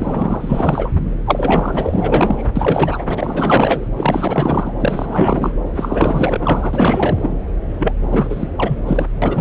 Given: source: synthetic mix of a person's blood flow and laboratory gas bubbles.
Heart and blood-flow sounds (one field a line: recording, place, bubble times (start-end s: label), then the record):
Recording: Doppler ultrasound of blood flow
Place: subclavian vein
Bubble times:
0.00-0.89 s: bubbles
1.26-2.49 s: bubbles
2.56-3.03 s: bubbles
3.08-3.91 s: bubbles
3.97-4.74 s: bubbles
4.79-5.63 s: bubbles
5.75-7.34 s: bubbles
7.79-7.92 s: bubbles
8.10-8.49 s: bubbles
8.56-8.81 s: bubbles
8.86-9.07 s: bubbles
9.22-9.41 s: bubbles
From the record:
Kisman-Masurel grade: 444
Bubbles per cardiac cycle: continuous sound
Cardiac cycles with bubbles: 100%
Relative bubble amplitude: maximal (0.775 to 0.999)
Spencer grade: 4 (maximum detectable bubble signal sounding continuously throughout systole and diastole of every cardiac period, and overriding the amplitude of the normal cardiac signals)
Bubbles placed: anywhere in the cardiac cycle